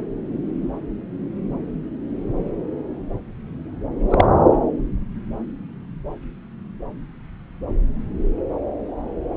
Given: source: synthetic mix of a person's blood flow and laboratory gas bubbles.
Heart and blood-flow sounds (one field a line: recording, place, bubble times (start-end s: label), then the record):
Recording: Doppler ultrasound of blood flow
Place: subclavian vein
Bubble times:
4.10-4.26 s: bubbles
From the record:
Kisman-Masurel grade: 113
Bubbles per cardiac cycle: 1 to 2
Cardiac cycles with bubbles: 1 to 10%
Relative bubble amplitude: loud (0.450 to 0.775)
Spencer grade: 1 (occasional bubble signal discernible with the cardiac motion signal, with majority of cardiac periods free of bubbles)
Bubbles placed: anywhere in the cardiac cycle